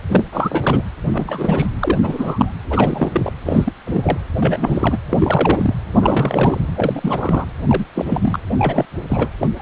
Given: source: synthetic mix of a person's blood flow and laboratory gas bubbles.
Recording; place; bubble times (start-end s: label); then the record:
Doppler ultrasound of blood flow; precordium
0.09-0.23 s: bubbles
0.32-0.82 s: bubbles
1.04-1.67 s: bubbles
1.79-2.54 s: bubbles
2.70-3.32 s: bubbles
3.45-3.72 s: bubbles
3.86-4.18 s: bubbles
4.36-4.98 s: bubbles
5.09-5.74 s: bubbles
6.01-6.61 s: bubbles
6.75-7.45 s: bubbles
7.67-7.85 s: bubbles
7.95-8.39 s: bubbles
8.47-8.85 s: bubbles
9.09-9.29 s: bubbles
9.39-9.49 s: bubbles
9.58-9.62 s: bubbles
From the record:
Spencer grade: 3 (all of the cardiac periods contain showers or single bubble signals, but not dominating or overriding the cardiac motion signals); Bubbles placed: anywhere in the cardiac cycle